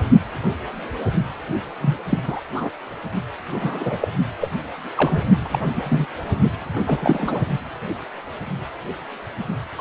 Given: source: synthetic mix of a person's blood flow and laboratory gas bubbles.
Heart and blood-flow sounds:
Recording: Doppler ultrasound of blood flow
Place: precordium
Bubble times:
1.80-1.97 s: bubbles
2.09-2.19 s: bubbles
2.26-2.41 s: bubbles
2.54-2.71 s: bubbles
3.51-3.98 s: bubbles
4.00-4.08 s: bubbles
4.41-4.50 s: bubbles
4.96-5.23 s: bubbles
5.39-6.07 s: bubbles
6.87-7.42 s: bubbles
9.78-9.81 s: bubbles
From the record:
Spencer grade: 3 (all of the cardiac periods contain showers or single bubble signals, but not dominating or overriding the cardiac motion signals)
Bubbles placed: only in the low amplitude regions of the cardiac cycle

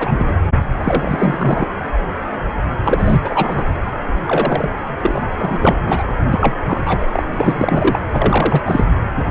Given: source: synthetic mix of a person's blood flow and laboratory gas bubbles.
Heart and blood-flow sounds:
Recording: Doppler ultrasound of blood flow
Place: precordium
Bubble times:
0.00-0.12 s: bubbles
0.18-0.35 s: bubbles
0.79-1.67 s: bubbles
2.84-3.19 s: bubbles
3.22-3.65 s: bubbles
4.27-4.70 s: bubbles
5.01-5.22 s: bubbles
5.38-5.75 s: bubbles
5.85-6.04 s: bubbles
6.30-6.55 s: bubbles
6.64-6.83 s: bubbles
6.85-7.05 s: bubbles
7.13-7.22 s: bubbles
7.35-7.99 s: bubbles
8.12-8.62 s: bubbles
8.65-8.85 s: bubbles
From the record:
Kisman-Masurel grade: 333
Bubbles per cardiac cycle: rolling drumbeat, 9 or more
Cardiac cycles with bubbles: 50 to 99%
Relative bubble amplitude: loud (0.450 to 0.775)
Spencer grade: 3 (all of the cardiac periods contain showers or single bubble signals, but not dominating or overriding the cardiac motion signals)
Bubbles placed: anywhere in the cardiac cycle

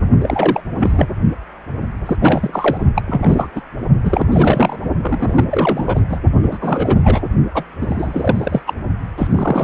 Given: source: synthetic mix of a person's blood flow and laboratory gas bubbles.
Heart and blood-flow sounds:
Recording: Doppler ultrasound of blood flow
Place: precordium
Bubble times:
0.21-0.60 s: bubbles
0.79-1.08 s: bubbles
2.06-2.17 s: bubbles
2.20-2.77 s: bubbles
2.95-3.02 s: bubbles
3.08-3.48 s: bubbles
3.55-3.61 s: bubbles
4.03-4.27 s: bubbles
4.31-4.79 s: bubbles
5.02-5.44 s: bubbles
5.49-6.00 s: bubbles
6.09-6.19 s: bubbles
6.42-6.58 s: bubbles
6.61-6.97 s: bubbles
7.02-7.26 s: bubbles
7.54-7.63 s: bubbles
7.80-8.62 s: bubbles
8.66-8.73 s: bubbles
9.17-9.28 s: bubbles
9.31-9.63 s: bubbles
From the record:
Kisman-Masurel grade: 343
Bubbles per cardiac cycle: rolling drumbeat, 9 or more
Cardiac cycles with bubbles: 100%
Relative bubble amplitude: loud (0.450 to 0.775)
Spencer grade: 3 (all of the cardiac periods contain showers or single bubble signals, but not dominating or overriding the cardiac motion signals)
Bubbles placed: only in the low amplitude regions of the cardiac cycle

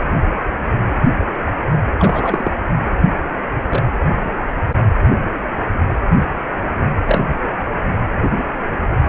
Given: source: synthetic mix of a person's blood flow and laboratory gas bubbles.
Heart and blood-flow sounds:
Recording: Doppler ultrasound of blood flow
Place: precordium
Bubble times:
1.99-2.51 s: bubbles
3.69-3.83 s: bubbles
7.06-7.20 s: bubbles
From the record:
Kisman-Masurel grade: 122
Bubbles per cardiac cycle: 1 to 2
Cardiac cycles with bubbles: 10 to 50%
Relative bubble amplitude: moderate (0.250 to 0.450)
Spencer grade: 2 (many but less than half of the cardiac periods contain bubble signals, singularly or in groups)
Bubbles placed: anywhere in the cardiac cycle

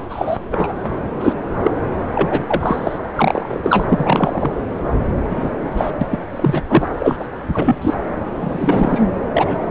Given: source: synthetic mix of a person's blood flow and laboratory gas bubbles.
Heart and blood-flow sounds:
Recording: Doppler ultrasound of blood flow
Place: subclavian vein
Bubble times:
0.09-0.37 s: bubbles
0.51-0.73 s: bubbles
1.20-1.33 s: bubbles
1.62-1.71 s: bubbles
2.15-2.44 s: bubbles
2.47-2.98 s: bubbles
3.15-4.52 s: bubbles
5.25-5.50 s: bubbles
5.77-5.91 s: bubbles
6.01-6.07 s: bubbles
6.11-6.20 s: bubbles
6.36-6.62 s: bubbles
6.69-6.88 s: bubbles
6.96-7.17 s: bubbles
7.20-7.27 s: bubbles
7.52-7.76 s: bubbles
7.81-7.94 s: bubbles
8.41-9.06 s: bubbles
9.34-9.67 s: bubbles
From the record:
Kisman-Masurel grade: 233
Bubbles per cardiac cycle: several, 3 to 8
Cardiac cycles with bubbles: 50 to 99%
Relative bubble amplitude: loud (0.450 to 0.775)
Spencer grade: 3 (all of the cardiac periods contain showers or single bubble signals, but not dominating or overriding the cardiac motion signals)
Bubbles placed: anywhere in the cardiac cycle

